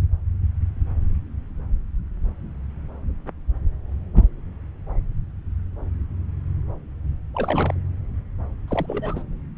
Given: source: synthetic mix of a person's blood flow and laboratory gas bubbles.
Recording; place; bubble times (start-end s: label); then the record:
Doppler ultrasound of blood flow; subclavian vein
7.34-7.78 s: bubbles
8.68-9.24 s: bubbles
From the record:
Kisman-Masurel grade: 212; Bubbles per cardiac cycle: several, 3 to 8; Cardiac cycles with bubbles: 1 to 10%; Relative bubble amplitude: moderate (0.250 to 0.450); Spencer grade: 1 (occasional bubble signal discernible with the cardiac motion signal, with majority of cardiac periods free of bubbles); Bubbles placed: anywhere in the cardiac cycle